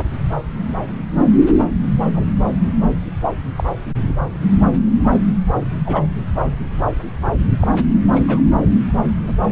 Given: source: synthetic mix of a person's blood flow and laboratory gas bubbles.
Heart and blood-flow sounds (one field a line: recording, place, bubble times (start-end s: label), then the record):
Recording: Doppler ultrasound of blood flow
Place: subclavian vein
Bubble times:
2.14-2.25 s: bubbles
3.56-3.64 s: bubbles
4.20-4.27 s: bubbles
5.85-6.03 s: bubbles
7.60-7.67 s: bubbles
8.12-8.22 s: bubbles
8.27-8.41 s: bubbles
9.22-9.32 s: bubbles
From the record:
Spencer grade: 2 (many but less than half of the cardiac periods contain bubble signals, singularly or in groups)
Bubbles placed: anywhere in the cardiac cycle